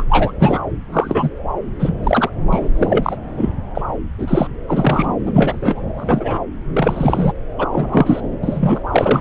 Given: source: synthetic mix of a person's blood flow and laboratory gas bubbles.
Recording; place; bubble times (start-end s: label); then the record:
Doppler ultrasound of blood flow; subclavian vein
0.00-0.04 s: bubbles
0.09-0.32 s: bubbles
0.39-0.59 s: bubbles
0.92-1.29 s: bubbles
1.79-1.93 s: bubbles
2.03-2.30 s: bubbles
2.50-2.69 s: bubbles
2.75-3.17 s: bubbles
3.36-3.52 s: bubbles
3.74-3.81 s: bubbles
4.18-4.49 s: bubbles
4.68-5.14 s: bubbles
5.25-5.81 s: bubbles
5.97-6.40 s: bubbles
6.74-7.33 s: bubbles
7.58-7.67 s: bubbles
7.72-8.21 s: bubbles
8.43-8.80 s: bubbles
8.91-9.21 s: bubbles
From the record:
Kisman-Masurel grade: 243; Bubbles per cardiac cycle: several, 3 to 8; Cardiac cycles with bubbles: 100%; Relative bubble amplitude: loud (0.450 to 0.775); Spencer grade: 3 (all of the cardiac periods contain showers or single bubble signals, but not dominating or overriding the cardiac motion signals); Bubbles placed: anywhere in the cardiac cycle